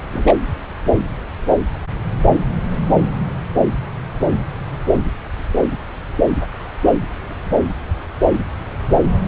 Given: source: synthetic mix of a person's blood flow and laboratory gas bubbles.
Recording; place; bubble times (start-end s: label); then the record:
Doppler ultrasound of blood flow; subclavian vein
0.12-0.33 s: bubbles
From the record:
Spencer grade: 1 (occasional bubble signal discernible with the cardiac motion signal, with majority of cardiac periods free of bubbles); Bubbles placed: anywhere in the cardiac cycle